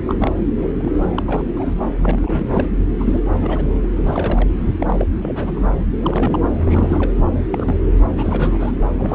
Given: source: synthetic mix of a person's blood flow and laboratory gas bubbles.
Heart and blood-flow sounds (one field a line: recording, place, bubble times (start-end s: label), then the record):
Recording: Doppler ultrasound of blood flow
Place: subclavian vein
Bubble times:
0.07-0.14 s: bubbles
0.19-0.31 s: bubbles
0.58-0.68 s: bubbles
0.73-0.99 s: bubbles
1.16-1.23 s: bubbles
1.26-1.43 s: bubbles
1.56-1.75 s: bubbles
2.02-2.49 s: bubbles
2.53-2.66 s: bubbles
2.98-3.19 s: bubbles
3.34-3.87 s: bubbles
3.98-4.48 s: bubbles
4.80-5.07 s: bubbles
5.21-5.74 s: bubbles
6.02-6.44 s: bubbles
6.54-7.13 s: bubbles
7.52-7.82 s: bubbles
8.17-8.72 s: bubbles
8.98-9.15 s: bubbles
From the record:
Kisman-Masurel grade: 242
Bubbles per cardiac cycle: several, 3 to 8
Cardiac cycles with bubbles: 100%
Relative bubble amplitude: moderate (0.250 to 0.450)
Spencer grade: 3 (all of the cardiac periods contain showers or single bubble signals, but not dominating or overriding the cardiac motion signals)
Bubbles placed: anywhere in the cardiac cycle